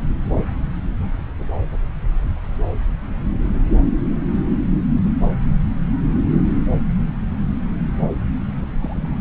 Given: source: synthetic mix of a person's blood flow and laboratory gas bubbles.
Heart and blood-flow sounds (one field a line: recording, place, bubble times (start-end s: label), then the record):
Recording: Doppler ultrasound of blood flow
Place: subclavian vein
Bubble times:
8.80-9.17 s: bubbles
From the record:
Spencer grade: 1 (occasional bubble signal discernible with the cardiac motion signal, with majority of cardiac periods free of bubbles)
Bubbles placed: anywhere in the cardiac cycle